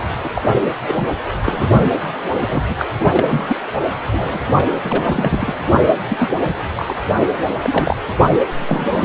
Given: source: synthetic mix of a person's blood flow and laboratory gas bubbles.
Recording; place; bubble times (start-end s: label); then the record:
Doppler ultrasound of blood flow; precordium
0.23-0.29 s: bubbles
0.34-0.42 s: bubbles
0.87-1.05 s: bubbles
1.44-1.91 s: bubbles
2.46-2.63 s: bubbles
2.68-2.75 s: bubbles
2.79-2.86 s: bubbles
2.99-3.06 s: bubbles
3.17-3.56 s: bubbles
4.12-4.46 s: bubbles
4.56-4.64 s: bubbles
4.83-5.55 s: bubbles
5.69-5.83 s: bubbles
5.88-5.92 s: bubbles
6.08-6.30 s: bubbles
6.44-6.54 s: bubbles
6.75-6.94 s: bubbles
7.17-7.25 s: bubbles
7.62-7.96 s: bubbles
8.66-9.05 s: bubbles
From the record:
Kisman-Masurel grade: 242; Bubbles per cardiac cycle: several, 3 to 8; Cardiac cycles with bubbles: 100%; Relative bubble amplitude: moderate (0.250 to 0.450); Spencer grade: 3 (all of the cardiac periods contain showers or single bubble signals, but not dominating or overriding the cardiac motion signals); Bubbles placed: anywhere in the cardiac cycle